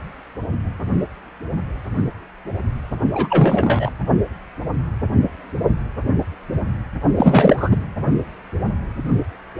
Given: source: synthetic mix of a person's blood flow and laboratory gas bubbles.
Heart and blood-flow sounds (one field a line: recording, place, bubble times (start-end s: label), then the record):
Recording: Doppler ultrasound of blood flow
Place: precordium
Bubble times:
3.12-3.90 s: bubbles
7.17-7.85 s: bubbles
From the record:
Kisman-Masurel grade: 223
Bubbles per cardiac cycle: several, 3 to 8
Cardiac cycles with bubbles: 10 to 50%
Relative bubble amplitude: loud (0.450 to 0.775)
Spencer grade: 2 (many but less than half of the cardiac periods contain bubble signals, singularly or in groups)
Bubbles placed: only in the low amplitude regions of the cardiac cycle